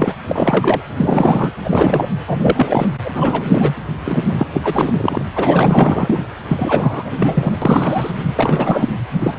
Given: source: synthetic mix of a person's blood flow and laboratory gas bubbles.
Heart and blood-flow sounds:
Doppler ultrasound of blood flow; precordium
0.00-0.16 s: bubbles
0.26-0.81 s: bubbles
0.98-1.51 s: bubbles
1.64-2.09 s: bubbles
2.28-2.88 s: bubbles
3.04-3.11 s: bubbles
3.14-3.72 s: bubbles
4.04-4.46 s: bubbles
4.53-5.25 s: bubbles
5.35-6.19 s: bubbles
6.47-7.58 s: bubbles
7.62-8.96 s: bubbles
9.12-9.39 s: bubbles
From the record:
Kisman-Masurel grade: 343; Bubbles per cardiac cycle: rolling drumbeat, 9 or more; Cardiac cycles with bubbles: 100%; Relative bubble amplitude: loud (0.450 to 0.775); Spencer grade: 3 (all of the cardiac periods contain showers or single bubble signals, but not dominating or overriding the cardiac motion signals); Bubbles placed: anywhere in the cardiac cycle

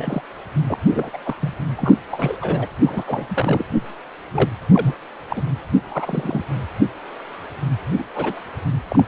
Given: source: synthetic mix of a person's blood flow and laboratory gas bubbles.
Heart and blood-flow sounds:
Doppler ultrasound of blood flow; precordium
0.00-0.22 s: bubbles
0.69-1.10 s: bubbles
1.13-1.18 s: bubbles
1.25-1.35 s: bubbles
1.40-1.54 s: bubbles
1.77-1.94 s: bubbles
2.11-2.38 s: bubbles
2.40-2.67 s: bubbles
2.80-3.04 s: bubbles
3.07-3.26 s: bubbles
3.29-3.64 s: bubbles
4.32-4.50 s: bubbles
4.74-4.94 s: bubbles
5.29-5.44 s: bubbles
5.89-6.46 s: bubbles
7.98-8.03 s: bubbles
8.15-8.43 s: bubbles
8.88-9.05 s: bubbles
From the record:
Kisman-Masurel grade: 242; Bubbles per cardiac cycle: several, 3 to 8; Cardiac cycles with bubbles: 100%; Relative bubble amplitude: moderate (0.250 to 0.450); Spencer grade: 3 (all of the cardiac periods contain showers or single bubble signals, but not dominating or overriding the cardiac motion signals); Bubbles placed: anywhere in the cardiac cycle

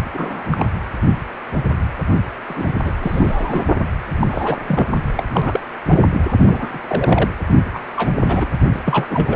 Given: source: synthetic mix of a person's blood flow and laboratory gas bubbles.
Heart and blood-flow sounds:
Doppler ultrasound of blood flow; precordium
0.13-0.44 s: bubbles
0.51-0.69 s: bubbles
2.12-2.18 s: bubbles
2.47-2.74 s: bubbles
2.85-2.92 s: bubbles
3.00-3.63 s: bubbles
4.19-4.58 s: bubbles
4.67-4.97 s: bubbles
5.17-5.23 s: bubbles
5.35-5.61 s: bubbles
5.88-6.05 s: bubbles
6.11-6.34 s: bubbles
6.38-6.79 s: bubbles
6.88-7.29 s: bubbles
7.73-7.79 s: bubbles
7.96-8.13 s: bubbles
8.24-8.46 s: bubbles
8.73-8.79 s: bubbles
8.84-9.36 s: bubbles
From the record:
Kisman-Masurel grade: 232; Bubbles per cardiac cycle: several, 3 to 8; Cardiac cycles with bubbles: 50 to 99%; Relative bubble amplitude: moderate (0.250 to 0.450); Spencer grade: 3 (all of the cardiac periods contain showers or single bubble signals, but not dominating or overriding the cardiac motion signals); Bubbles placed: anywhere in the cardiac cycle

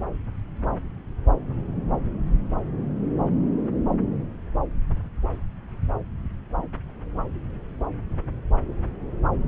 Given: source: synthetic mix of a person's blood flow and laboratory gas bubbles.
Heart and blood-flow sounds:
Doppler ultrasound of blood flow; subclavian vein
no bubbles
From the record:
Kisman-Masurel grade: 000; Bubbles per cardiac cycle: 0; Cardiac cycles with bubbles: 0%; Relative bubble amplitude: no bubbles discernible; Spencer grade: 0 (complete lack of bubble signals)

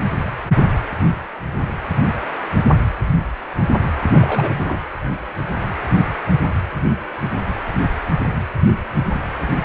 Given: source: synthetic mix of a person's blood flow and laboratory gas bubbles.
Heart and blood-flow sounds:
Doppler ultrasound of blood flow; precordium
4.13-4.78 s: bubbles
From the record:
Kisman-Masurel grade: 212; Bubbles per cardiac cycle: several, 3 to 8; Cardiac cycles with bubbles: 1 to 10%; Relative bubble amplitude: moderate (0.250 to 0.450); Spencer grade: 1 (occasional bubble signal discernible with the cardiac motion signal, with majority of cardiac periods free of bubbles); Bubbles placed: anywhere in the cardiac cycle

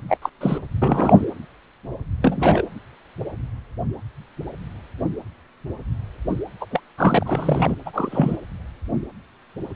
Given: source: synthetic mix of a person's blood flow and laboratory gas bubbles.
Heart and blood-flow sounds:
Doppler ultrasound of blood flow; precordium
0.08-0.17 s: bubbles
0.21-0.30 s: bubbles
0.41-0.58 s: bubbles
0.81-1.23 s: bubbles
2.22-2.62 s: bubbles
6.60-6.66 s: bubbles
6.71-6.80 s: bubbles
6.97-7.75 s: bubbles
7.85-7.91 s: bubbles
7.93-8.36 s: bubbles
From the record:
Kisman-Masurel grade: 232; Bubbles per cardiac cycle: several, 3 to 8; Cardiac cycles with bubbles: 50 to 99%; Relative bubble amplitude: moderate (0.250 to 0.450); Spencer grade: 3 (all of the cardiac periods contain showers or single bubble signals, but not dominating or overriding the cardiac motion signals); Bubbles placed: anywhere in the cardiac cycle

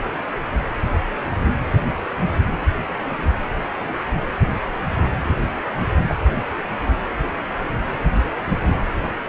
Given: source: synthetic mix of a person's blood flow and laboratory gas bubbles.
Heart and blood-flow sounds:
Doppler ultrasound of blood flow; precordium
6.08-6.15 s: bubbles
From the record:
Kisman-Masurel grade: 111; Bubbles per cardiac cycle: 1 to 2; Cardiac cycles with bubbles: 1 to 10%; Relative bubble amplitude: barely perceptible (0.100 to 0.250); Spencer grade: 1 (occasional bubble signal discernible with the cardiac motion signal, with majority of cardiac periods free of bubbles); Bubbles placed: anywhere in the cardiac cycle

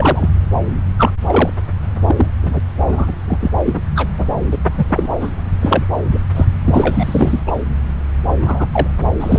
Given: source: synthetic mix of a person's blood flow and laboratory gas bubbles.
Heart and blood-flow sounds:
Doppler ultrasound of blood flow; subclavian vein
0.00-0.30 s: bubbles
0.97-1.12 s: bubbles
1.21-1.50 s: bubbles
2.06-2.26 s: bubbles
2.42-2.60 s: bubbles
2.86-3.12 s: bubbles
3.27-3.50 s: bubbles
3.65-3.80 s: bubbles
3.95-4.08 s: bubbles
4.18-4.25 s: bubbles
4.51-4.58 s: bubbles
4.77-4.85 s: bubbles
4.88-5.31 s: bubbles
5.62-5.84 s: bubbles
6.09-6.17 s: bubbles
6.34-6.45 s: bubbles
6.65-7.40 s: bubbles
7.47-7.51 s: bubbles
8.41-8.67 s: bubbles
8.71-8.88 s: bubbles
9.20-9.39 s: bubbles
From the record:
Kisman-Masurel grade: 243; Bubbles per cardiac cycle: several, 3 to 8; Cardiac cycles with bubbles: 100%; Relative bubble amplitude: loud (0.450 to 0.775); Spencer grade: 3 (all of the cardiac periods contain showers or single bubble signals, but not dominating or overriding the cardiac motion signals); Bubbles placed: anywhere in the cardiac cycle

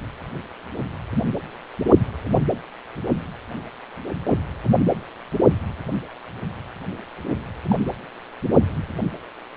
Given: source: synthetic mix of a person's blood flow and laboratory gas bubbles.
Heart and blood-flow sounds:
Doppler ultrasound of blood flow; precordium
7.69-7.76 s: bubbles
From the record:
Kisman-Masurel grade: 112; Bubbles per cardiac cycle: 1 to 2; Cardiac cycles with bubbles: 1 to 10%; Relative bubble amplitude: moderate (0.250 to 0.450); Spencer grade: 1 (occasional bubble signal discernible with the cardiac motion signal, with majority of cardiac periods free of bubbles); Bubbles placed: only in the low amplitude regions of the cardiac cycle

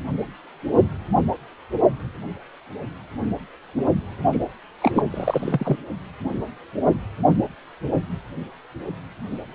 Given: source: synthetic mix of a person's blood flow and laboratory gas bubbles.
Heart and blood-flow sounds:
Doppler ultrasound of blood flow; precordium
4.32-4.38 s: bubbles
4.82-5.04 s: bubbles
5.11-5.76 s: bubbles
From the record:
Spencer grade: 1 (occasional bubble signal discernible with the cardiac motion signal, with majority of cardiac periods free of bubbles); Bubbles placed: only in the low amplitude regions of the cardiac cycle

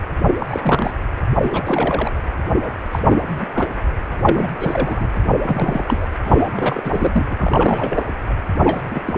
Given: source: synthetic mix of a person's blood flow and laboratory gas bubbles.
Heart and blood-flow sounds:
Doppler ultrasound of blood flow; precordium
0.27-0.36 s: bubbles
0.38-0.93 s: bubbles
1.42-2.10 s: bubbles
2.91-2.99 s: bubbles
3.05-3.46 s: bubbles
3.54-3.69 s: bubbles
4.22-4.51 s: bubbles
4.59-5.07 s: bubbles
5.42-5.84 s: bubbles
5.87-6.07 s: bubbles
6.23-7.25 s: bubbles
7.30-7.34 s: bubbles
7.38-8.03 s: bubbles
8.64-8.82 s: bubbles
8.90-9.00 s: bubbles
9.06-9.15 s: bubbles
From the record:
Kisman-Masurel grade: 242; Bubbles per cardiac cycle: several, 3 to 8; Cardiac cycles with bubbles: 100%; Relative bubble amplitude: moderate (0.250 to 0.450); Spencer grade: 3 (all of the cardiac periods contain showers or single bubble signals, but not dominating or overriding the cardiac motion signals); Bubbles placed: anywhere in the cardiac cycle

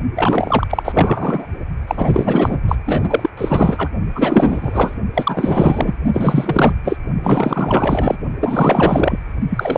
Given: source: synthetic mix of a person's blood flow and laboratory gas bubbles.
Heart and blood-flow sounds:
Doppler ultrasound of blood flow; precordium
0.15-0.67 s: bubbles
0.70-1.47 s: bubbles
1.87-2.60 s: bubbles
2.67-2.75 s: bubbles
2.85-3.29 s: bubbles
3.37-3.89 s: bubbles
4.14-4.95 s: bubbles
5.14-5.96 s: bubbles
6.13-6.75 s: bubbles
6.84-6.96 s: bubbles
7.23-8.17 s: bubbles
8.40-9.19 s: bubbles
9.50-9.78 s: bubbles
From the record:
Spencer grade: 4 (maximum detectable bubble signal sounding continuously throughout systole and diastole of every cardiac period, and overriding the amplitude of the normal cardiac signals); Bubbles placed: only in the low amplitude regions of the cardiac cycle

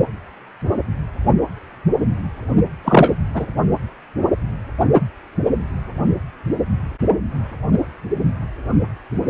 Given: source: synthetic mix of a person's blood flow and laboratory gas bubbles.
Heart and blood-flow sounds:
Doppler ultrasound of blood flow; precordium
2.84-3.15 s: bubbles
3.33-3.52 s: bubbles
From the record:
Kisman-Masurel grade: 213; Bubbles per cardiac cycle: several, 3 to 8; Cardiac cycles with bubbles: 1 to 10%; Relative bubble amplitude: loud (0.450 to 0.775); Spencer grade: 1 (occasional bubble signal discernible with the cardiac motion signal, with majority of cardiac periods free of bubbles); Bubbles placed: only in the low amplitude regions of the cardiac cycle

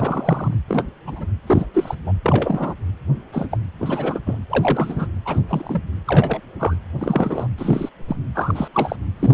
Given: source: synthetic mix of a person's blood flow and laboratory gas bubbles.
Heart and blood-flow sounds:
Doppler ultrasound of blood flow; precordium
0.00-0.55 s: bubbles
0.68-0.83 s: bubbles
1.06-1.26 s: bubbles
1.47-1.66 s: bubbles
1.74-1.95 s: bubbles
2.04-2.12 s: bubbles
2.23-2.75 s: bubbles
3.33-3.48 s: bubbles
3.51-3.57 s: bubbles
3.79-4.20 s: bubbles
4.26-4.38 s: bubbles
4.50-5.08 s: bubbles
5.25-5.40 s: bubbles
5.48-5.81 s: bubbles
6.07-6.41 s: bubbles
6.59-6.76 s: bubbles
6.99-7.48 s: bubbles
7.58-7.89 s: bubbles
8.08-8.16 s: bubbles
8.35-8.68 s: bubbles
8.72-8.96 s: bubbles
9.19-9.34 s: bubbles
From the record:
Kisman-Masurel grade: 242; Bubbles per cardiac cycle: several, 3 to 8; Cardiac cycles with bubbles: 100%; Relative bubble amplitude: moderate (0.250 to 0.450); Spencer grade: 3 (all of the cardiac periods contain showers or single bubble signals, but not dominating or overriding the cardiac motion signals); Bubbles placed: anywhere in the cardiac cycle

